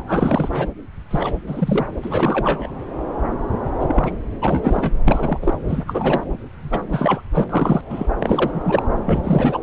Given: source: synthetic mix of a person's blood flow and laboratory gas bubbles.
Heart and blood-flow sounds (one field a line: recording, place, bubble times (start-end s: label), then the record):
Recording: Doppler ultrasound of blood flow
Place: subclavian vein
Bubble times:
0.00-0.69 s: bubbles
1.10-1.35 s: bubbles
1.46-1.86 s: bubbles
2.02-2.71 s: bubbles
3.80-4.12 s: bubbles
4.41-4.96 s: bubbles
5.08-5.54 s: bubbles
5.67-5.84 s: bubbles
5.87-6.24 s: bubbles
6.62-6.82 s: bubbles
6.90-7.21 s: bubbles
7.33-7.44 s: bubbles
7.49-7.81 s: bubbles
7.89-8.07 s: bubbles
8.20-8.83 s: bubbles
9.06-9.21 s: bubbles
9.24-9.59 s: bubbles
From the record:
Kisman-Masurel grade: 333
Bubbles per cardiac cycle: rolling drumbeat, 9 or more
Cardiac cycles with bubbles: 50 to 99%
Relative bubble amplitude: loud (0.450 to 0.775)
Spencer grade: 3 (all of the cardiac periods contain showers or single bubble signals, but not dominating or overriding the cardiac motion signals)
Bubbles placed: anywhere in the cardiac cycle